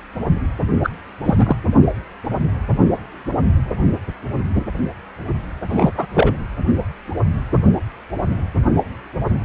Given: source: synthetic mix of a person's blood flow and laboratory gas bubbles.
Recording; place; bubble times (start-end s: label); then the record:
Doppler ultrasound of blood flow; precordium
0.83-0.90 s: bubbles
1.24-1.34 s: bubbles
1.38-1.55 s: bubbles
5.68-5.91 s: bubbles
5.97-6.06 s: bubbles
6.14-6.36 s: bubbles
From the record:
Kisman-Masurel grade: 223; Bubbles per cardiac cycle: several, 3 to 8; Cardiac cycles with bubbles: 10 to 50%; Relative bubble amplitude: loud (0.450 to 0.775); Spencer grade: 2 (many but less than half of the cardiac periods contain bubble signals, singularly or in groups); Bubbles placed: anywhere in the cardiac cycle